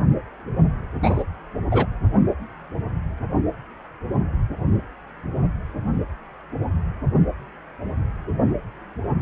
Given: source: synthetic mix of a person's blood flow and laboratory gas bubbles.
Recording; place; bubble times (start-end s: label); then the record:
Doppler ultrasound of blood flow; precordium
1.02-1.24 s: bubbles
1.71-1.86 s: bubbles
From the record:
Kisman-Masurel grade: 112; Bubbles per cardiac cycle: 1 to 2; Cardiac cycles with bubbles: 1 to 10%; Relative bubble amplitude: moderate (0.250 to 0.450); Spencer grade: 1 (occasional bubble signal discernible with the cardiac motion signal, with majority of cardiac periods free of bubbles); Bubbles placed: only in the low amplitude regions of the cardiac cycle